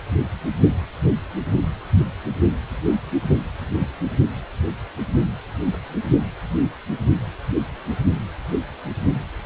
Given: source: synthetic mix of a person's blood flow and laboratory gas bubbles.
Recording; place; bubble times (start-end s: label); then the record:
Doppler ultrasound of blood flow; precordium
no bubbles
From the record:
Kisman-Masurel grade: 000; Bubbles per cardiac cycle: 0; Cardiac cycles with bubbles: 0%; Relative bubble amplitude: no bubbles discernible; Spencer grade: 0 (complete lack of bubble signals)